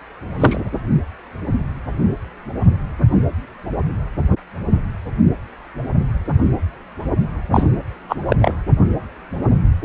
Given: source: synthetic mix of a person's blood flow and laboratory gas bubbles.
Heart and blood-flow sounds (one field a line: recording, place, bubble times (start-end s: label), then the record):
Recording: Doppler ultrasound of blood flow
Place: precordium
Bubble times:
0.40-0.60 s: bubbles
7.51-7.66 s: bubbles
8.09-8.16 s: bubbles
8.29-8.37 s: bubbles
8.41-8.54 s: bubbles
From the record:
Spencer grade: 2 (many but less than half of the cardiac periods contain bubble signals, singularly or in groups)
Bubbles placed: anywhere in the cardiac cycle